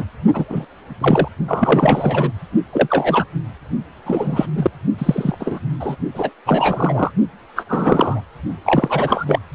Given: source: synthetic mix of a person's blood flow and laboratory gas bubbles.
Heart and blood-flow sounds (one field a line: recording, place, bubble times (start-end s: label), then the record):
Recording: Doppler ultrasound of blood flow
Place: precordium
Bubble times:
0.00-0.04 s: bubbles
0.33-0.44 s: bubbles
0.49-0.65 s: bubbles
1.00-1.28 s: bubbles
1.48-2.32 s: bubbles
2.73-3.25 s: bubbles
4.05-4.46 s: bubbles
4.55-4.71 s: bubbles
4.98-5.59 s: bubbles
5.79-5.96 s: bubbles
6.14-6.29 s: bubbles
6.46-7.11 s: bubbles
7.55-7.64 s: bubbles
7.69-8.22 s: bubbles
8.64-9.40 s: bubbles
From the record:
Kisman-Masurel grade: 243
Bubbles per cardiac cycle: several, 3 to 8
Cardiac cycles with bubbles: 100%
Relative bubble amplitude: loud (0.450 to 0.775)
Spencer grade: 3 (all of the cardiac periods contain showers or single bubble signals, but not dominating or overriding the cardiac motion signals)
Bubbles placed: only in the low amplitude regions of the cardiac cycle